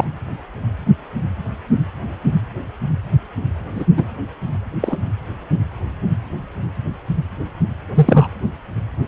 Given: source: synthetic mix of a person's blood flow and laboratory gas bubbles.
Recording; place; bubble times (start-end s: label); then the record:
Doppler ultrasound of blood flow; precordium
0.00-0.05 s: bubbles
3.75-3.86 s: bubbles
3.97-4.04 s: bubbles
4.81-5.00 s: bubbles
7.95-8.27 s: bubbles
From the record:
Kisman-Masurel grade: 123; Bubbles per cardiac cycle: 1 to 2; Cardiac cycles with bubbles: 10 to 50%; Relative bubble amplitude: loud (0.450 to 0.775); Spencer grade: 2 (many but less than half of the cardiac periods contain bubble signals, singularly or in groups); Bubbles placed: anywhere in the cardiac cycle